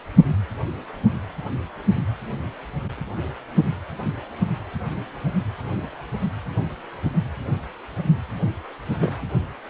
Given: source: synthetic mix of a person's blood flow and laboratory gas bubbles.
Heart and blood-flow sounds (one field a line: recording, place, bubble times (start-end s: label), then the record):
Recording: Doppler ultrasound of blood flow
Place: precordium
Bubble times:
8.99-9.15 s: bubbles
From the record:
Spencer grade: 1 (occasional bubble signal discernible with the cardiac motion signal, with majority of cardiac periods free of bubbles)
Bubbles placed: anywhere in the cardiac cycle